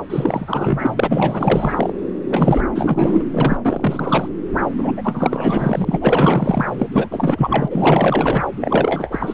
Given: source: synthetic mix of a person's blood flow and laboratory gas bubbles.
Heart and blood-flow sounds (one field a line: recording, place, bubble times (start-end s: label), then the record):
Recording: Doppler ultrasound of blood flow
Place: subclavian vein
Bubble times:
0.10-1.93 s: bubbles
2.30-2.61 s: bubbles
2.75-3.24 s: bubbles
3.31-3.57 s: bubbles
3.65-4.33 s: bubbles
4.77-4.92 s: bubbles
4.96-6.65 s: bubbles
6.77-6.88 s: bubbles
6.92-7.08 s: bubbles
7.10-8.45 s: bubbles
8.61-9.34 s: bubbles
From the record:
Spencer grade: 4 (maximum detectable bubble signal sounding continuously throughout systole and diastole of every cardiac period, and overriding the amplitude of the normal cardiac signals)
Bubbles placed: anywhere in the cardiac cycle